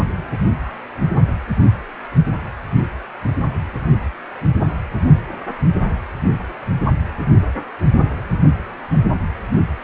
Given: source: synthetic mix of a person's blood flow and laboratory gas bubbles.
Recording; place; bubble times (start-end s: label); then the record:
Doppler ultrasound of blood flow; precordium
no bubbles
From the record:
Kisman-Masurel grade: 000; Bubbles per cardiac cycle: 0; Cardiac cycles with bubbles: 0%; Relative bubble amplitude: no bubbles discernible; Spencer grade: 0 (complete lack of bubble signals)